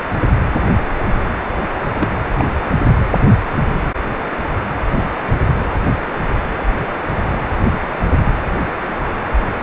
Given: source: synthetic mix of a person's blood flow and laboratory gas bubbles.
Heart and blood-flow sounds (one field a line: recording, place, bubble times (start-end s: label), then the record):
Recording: Doppler ultrasound of blood flow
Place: precordium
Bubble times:
1.98-2.10 s: bubbles
2.38-2.46 s: bubbles
From the record:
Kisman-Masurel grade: 122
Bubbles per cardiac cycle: 1 to 2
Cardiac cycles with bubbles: 10 to 50%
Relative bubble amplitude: moderate (0.250 to 0.450)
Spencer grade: 2 (many but less than half of the cardiac periods contain bubble signals, singularly or in groups)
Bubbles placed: anywhere in the cardiac cycle